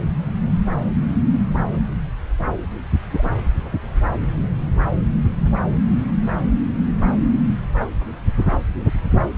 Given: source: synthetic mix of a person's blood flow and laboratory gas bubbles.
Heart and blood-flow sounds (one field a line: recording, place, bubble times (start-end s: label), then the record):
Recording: Doppler ultrasound of blood flow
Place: subclavian vein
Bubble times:
3.10-3.31 s: bubbles
From the record:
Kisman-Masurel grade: 111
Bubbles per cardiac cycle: 1 to 2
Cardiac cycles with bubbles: 1 to 10%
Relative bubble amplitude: barely perceptible (0.100 to 0.250)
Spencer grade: 1 (occasional bubble signal discernible with the cardiac motion signal, with majority of cardiac periods free of bubbles)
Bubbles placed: anywhere in the cardiac cycle